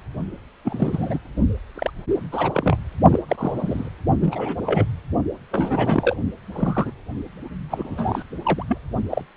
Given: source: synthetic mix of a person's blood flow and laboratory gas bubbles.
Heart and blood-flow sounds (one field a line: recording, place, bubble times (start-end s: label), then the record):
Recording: Doppler ultrasound of blood flow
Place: precordium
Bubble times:
0.65-1.18 s: bubbles
1.74-1.91 s: bubbles
2.31-2.77 s: bubbles
3.10-3.20 s: bubbles
3.28-3.89 s: bubbles
4.21-4.56 s: bubbles
4.66-4.84 s: bubbles
5.51-6.17 s: bubbles
6.52-6.92 s: bubbles
7.69-8.23 s: bubbles
8.45-8.63 s: bubbles
8.68-8.78 s: bubbles
9.11-9.22 s: bubbles
From the record:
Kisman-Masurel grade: 242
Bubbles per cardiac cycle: several, 3 to 8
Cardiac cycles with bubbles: 100%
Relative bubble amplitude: moderate (0.250 to 0.450)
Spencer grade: 3 (all of the cardiac periods contain showers or single bubble signals, but not dominating or overriding the cardiac motion signals)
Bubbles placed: only in the low amplitude regions of the cardiac cycle